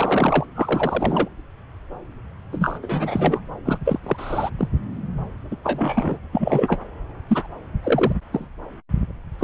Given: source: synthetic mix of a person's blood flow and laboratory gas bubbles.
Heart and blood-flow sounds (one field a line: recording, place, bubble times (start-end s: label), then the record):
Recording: Doppler ultrasound of blood flow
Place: subclavian vein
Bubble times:
0.00-0.46 s: bubbles
0.55-1.29 s: bubbles
2.52-2.79 s: bubbles
2.82-3.40 s: bubbles
3.64-3.78 s: bubbles
3.84-4.00 s: bubbles
4.03-4.50 s: bubbles
4.58-4.68 s: bubbles
5.50-5.56 s: bubbles
5.63-6.20 s: bubbles
6.32-6.80 s: bubbles
7.29-7.47 s: bubbles
7.83-8.12 s: bubbles
8.32-8.48 s: bubbles
9.39-9.44 s: bubbles
From the record:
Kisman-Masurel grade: 233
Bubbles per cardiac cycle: several, 3 to 8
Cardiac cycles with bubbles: 50 to 99%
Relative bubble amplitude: loud (0.450 to 0.775)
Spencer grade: 3 (all of the cardiac periods contain showers or single bubble signals, but not dominating or overriding the cardiac motion signals)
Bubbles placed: anywhere in the cardiac cycle